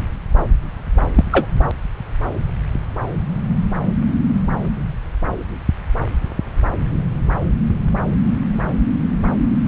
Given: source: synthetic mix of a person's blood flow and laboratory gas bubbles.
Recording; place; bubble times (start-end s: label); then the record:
Doppler ultrasound of blood flow; subclavian vein
1.15-1.24 s: bubbles
1.30-1.47 s: bubbles
From the record:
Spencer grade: 1 (occasional bubble signal discernible with the cardiac motion signal, with majority of cardiac periods free of bubbles); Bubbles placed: anywhere in the cardiac cycle